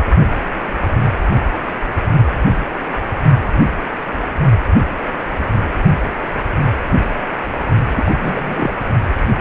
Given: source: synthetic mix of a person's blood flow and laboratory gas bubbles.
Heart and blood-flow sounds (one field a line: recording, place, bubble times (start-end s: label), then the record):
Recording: Doppler ultrasound of blood flow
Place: precordium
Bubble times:
7.94-8.15 s: bubbles
8.21-8.72 s: bubbles
From the record:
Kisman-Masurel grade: 212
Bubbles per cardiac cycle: several, 3 to 8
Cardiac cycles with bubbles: 1 to 10%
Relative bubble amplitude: moderate (0.250 to 0.450)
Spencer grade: 1 (occasional bubble signal discernible with the cardiac motion signal, with majority of cardiac periods free of bubbles)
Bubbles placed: only in the low amplitude regions of the cardiac cycle